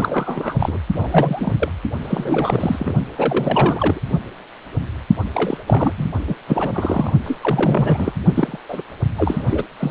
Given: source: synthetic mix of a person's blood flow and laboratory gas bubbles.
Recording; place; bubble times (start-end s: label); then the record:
Doppler ultrasound of blood flow; precordium
0.00-0.78 s: bubbles
0.92-1.71 s: bubbles
2.01-2.92 s: bubbles
3.17-4.00 s: bubbles
5.34-5.58 s: bubbles
5.67-5.93 s: bubbles
5.97-6.08 s: bubbles
6.27-6.35 s: bubbles
6.48-7.12 s: bubbles
7.24-7.38 s: bubbles
7.41-8.13 s: bubbles
8.36-8.57 s: bubbles
8.69-8.83 s: bubbles
9.17-9.64 s: bubbles
9.79-9.91 s: bubbles
From the record:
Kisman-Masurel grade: 332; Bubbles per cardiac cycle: rolling drumbeat, 9 or more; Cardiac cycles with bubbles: 50 to 99%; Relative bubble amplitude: moderate (0.250 to 0.450); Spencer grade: 3 (all of the cardiac periods contain showers or single bubble signals, but not dominating or overriding the cardiac motion signals); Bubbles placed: only in the low amplitude regions of the cardiac cycle